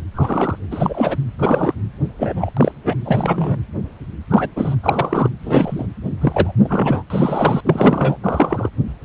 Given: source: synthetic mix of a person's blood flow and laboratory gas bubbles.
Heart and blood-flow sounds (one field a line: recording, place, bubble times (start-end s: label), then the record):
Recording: Doppler ultrasound of blood flow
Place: precordium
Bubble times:
0.14-0.59 s: bubbles
0.70-1.17 s: bubbles
1.39-1.74 s: bubbles
2.19-2.52 s: bubbles
2.56-2.72 s: bubbles
2.84-2.96 s: bubbles
3.04-3.57 s: bubbles
4.29-4.49 s: bubbles
4.56-4.75 s: bubbles
4.83-5.29 s: bubbles
5.43-5.86 s: bubbles
6.21-6.53 s: bubbles
6.63-7.03 s: bubbles
7.10-7.61 s: bubbles
7.65-8.16 s: bubbles
8.23-8.70 s: bubbles
From the record:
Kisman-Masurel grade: 233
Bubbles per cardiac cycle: several, 3 to 8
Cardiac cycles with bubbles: 50 to 99%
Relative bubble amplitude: loud (0.450 to 0.775)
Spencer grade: 3 (all of the cardiac periods contain showers or single bubble signals, but not dominating or overriding the cardiac motion signals)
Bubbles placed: anywhere in the cardiac cycle